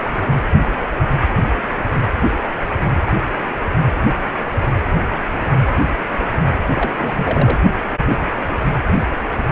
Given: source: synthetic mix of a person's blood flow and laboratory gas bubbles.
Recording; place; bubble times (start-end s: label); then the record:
Doppler ultrasound of blood flow; precordium
6.62-6.92 s: bubbles
6.98-7.58 s: bubbles
From the record:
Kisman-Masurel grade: 211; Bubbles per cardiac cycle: several, 3 to 8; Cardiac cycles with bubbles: 1 to 10%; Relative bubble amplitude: barely perceptible (0.100 to 0.250); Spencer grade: 1 (occasional bubble signal discernible with the cardiac motion signal, with majority of cardiac periods free of bubbles); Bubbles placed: anywhere in the cardiac cycle